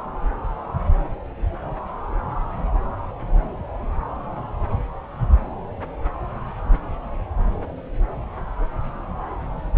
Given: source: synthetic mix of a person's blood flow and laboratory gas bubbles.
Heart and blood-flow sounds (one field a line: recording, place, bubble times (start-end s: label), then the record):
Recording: Doppler ultrasound of blood flow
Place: subclavian vein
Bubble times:
no bubbles
From the record:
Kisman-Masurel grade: 000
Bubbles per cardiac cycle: 0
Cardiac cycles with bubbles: 0%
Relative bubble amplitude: no bubbles discernible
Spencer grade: 0 (complete lack of bubble signals)